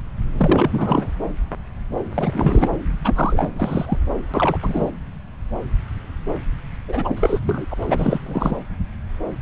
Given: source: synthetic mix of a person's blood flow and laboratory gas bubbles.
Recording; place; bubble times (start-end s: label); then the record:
Doppler ultrasound of blood flow; subclavian vein
0.38-1.07 s: bubbles
2.14-2.68 s: bubbles
3.04-3.50 s: bubbles
3.56-3.98 s: bubbles
4.33-4.59 s: bubbles
4.62-4.91 s: bubbles
6.88-7.39 s: bubbles
7.43-7.66 s: bubbles
7.71-7.74 s: bubbles
7.87-8.19 s: bubbles
8.26-8.57 s: bubbles
From the record:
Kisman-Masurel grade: 332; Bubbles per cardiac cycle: rolling drumbeat, 9 or more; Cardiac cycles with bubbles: 50 to 99%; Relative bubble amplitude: moderate (0.250 to 0.450); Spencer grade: 3 (all of the cardiac periods contain showers or single bubble signals, but not dominating or overriding the cardiac motion signals); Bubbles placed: anywhere in the cardiac cycle